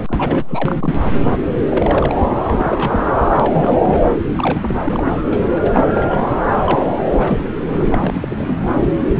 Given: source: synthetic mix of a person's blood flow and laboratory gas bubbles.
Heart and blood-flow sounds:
Doppler ultrasound of blood flow; subclavian vein
0.07-1.01 s: bubbles
1.69-2.16 s: bubbles
2.48-3.01 s: bubbles
3.40-4.00 s: bubbles
4.36-5.12 s: bubbles
5.25-5.42 s: bubbles
5.47-5.49 s: bubbles
5.54-5.92 s: bubbles
5.95-6.06 s: bubbles
6.08-6.23 s: bubbles
6.54-6.83 s: bubbles
6.88-6.93 s: bubbles
7.11-7.43 s: bubbles
7.72-8.57 s: bubbles
From the record:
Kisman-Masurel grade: 342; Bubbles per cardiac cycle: rolling drumbeat, 9 or more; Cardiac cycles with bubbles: 100%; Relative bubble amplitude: moderate (0.250 to 0.450); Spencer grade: 3 (all of the cardiac periods contain showers or single bubble signals, but not dominating or overriding the cardiac motion signals); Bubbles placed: anywhere in the cardiac cycle

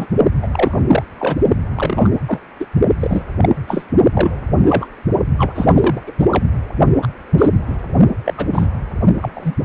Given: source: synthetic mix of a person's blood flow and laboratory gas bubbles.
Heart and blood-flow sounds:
Doppler ultrasound of blood flow; precordium
0.00-0.07 s: bubbles
0.42-0.47 s: bubbles
0.52-0.79 s: bubbles
0.89-1.02 s: bubbles
1.19-1.36 s: bubbles
1.76-2.12 s: bubbles
2.26-2.39 s: bubbles
2.59-2.66 s: bubbles
3.00-3.22 s: bubbles
3.41-3.49 s: bubbles
3.67-3.85 s: bubbles
4.13-4.47 s: bubbles
4.57-4.86 s: bubbles
5.38-5.53 s: bubbles
5.55-6.00 s: bubbles
6.07-6.12 s: bubbles
6.19-6.26 s: bubbles
6.31-6.45 s: bubbles
7.02-7.08 s: bubbles
7.38-7.49 s: bubbles
7.67-7.78 s: bubbles
8.25-8.34 s: bubbles
8.37-8.46 s: bubbles
8.52-8.68 s: bubbles
9.21-9.29 s: bubbles
9.34-9.54 s: bubbles
From the record:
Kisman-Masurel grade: 243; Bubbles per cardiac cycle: several, 3 to 8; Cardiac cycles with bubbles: 100%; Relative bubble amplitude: loud (0.450 to 0.775); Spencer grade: 3 (all of the cardiac periods contain showers or single bubble signals, but not dominating or overriding the cardiac motion signals); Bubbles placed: only in the low amplitude regions of the cardiac cycle

